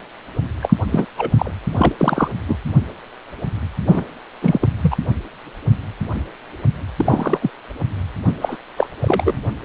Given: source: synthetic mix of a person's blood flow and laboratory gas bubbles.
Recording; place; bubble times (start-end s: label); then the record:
Doppler ultrasound of blood flow; precordium
0.62-0.75 s: bubbles
0.92-1.05 s: bubbles
1.18-1.30 s: bubbles
1.38-1.51 s: bubbles
1.72-1.92 s: bubbles
1.99-2.28 s: bubbles
2.47-2.56 s: bubbles
3.86-4.04 s: bubbles
4.42-4.58 s: bubbles
4.61-4.68 s: bubbles
4.81-4.96 s: bubbles
6.96-7.39 s: bubbles
7.42-7.50 s: bubbles
8.24-8.33 s: bubbles
8.42-8.56 s: bubbles
8.76-8.87 s: bubbles
9.00-9.39 s: bubbles
From the record:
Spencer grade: 3 (all of the cardiac periods contain showers or single bubble signals, but not dominating or overriding the cardiac motion signals); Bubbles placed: anywhere in the cardiac cycle